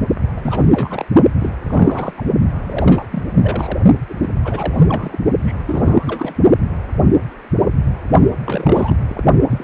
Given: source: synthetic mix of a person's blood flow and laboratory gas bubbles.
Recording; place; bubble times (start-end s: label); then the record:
Doppler ultrasound of blood flow; precordium
0.36-0.67 s: bubbles
0.72-1.05 s: bubbles
1.40-1.55 s: bubbles
1.62-2.14 s: bubbles
2.17-2.23 s: bubbles
2.65-3.06 s: bubbles
3.11-3.23 s: bubbles
3.40-3.79 s: bubbles
4.09-4.14 s: bubbles
4.21-4.29 s: bubbles
4.45-5.21 s: bubbles
5.45-5.55 s: bubbles
5.67-6.33 s: bubbles
8.45-8.97 s: bubbles
9.07-9.24 s: bubbles
9.50-9.64 s: bubbles
From the record:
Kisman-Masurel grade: 332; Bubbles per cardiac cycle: rolling drumbeat, 9 or more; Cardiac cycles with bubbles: 50 to 99%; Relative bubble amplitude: moderate (0.250 to 0.450); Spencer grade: 3 (all of the cardiac periods contain showers or single bubble signals, but not dominating or overriding the cardiac motion signals); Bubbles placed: only in the low amplitude regions of the cardiac cycle